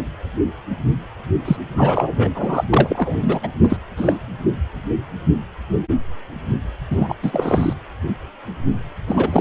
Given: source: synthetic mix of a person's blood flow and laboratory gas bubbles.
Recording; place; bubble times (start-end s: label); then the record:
Doppler ultrasound of blood flow; precordium
1.45-1.57 s: bubbles
1.76-2.28 s: bubbles
2.34-2.64 s: bubbles
2.70-3.40 s: bubbles
3.42-3.47 s: bubbles
3.62-3.76 s: bubbles
3.96-4.18 s: bubbles
6.91-7.16 s: bubbles
7.22-7.73 s: bubbles
9.07-9.41 s: bubbles
From the record:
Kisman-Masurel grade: 223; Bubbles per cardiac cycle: several, 3 to 8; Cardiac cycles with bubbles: 10 to 50%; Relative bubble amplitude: loud (0.450 to 0.775); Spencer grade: 2 (many but less than half of the cardiac periods contain bubble signals, singularly or in groups); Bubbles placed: anywhere in the cardiac cycle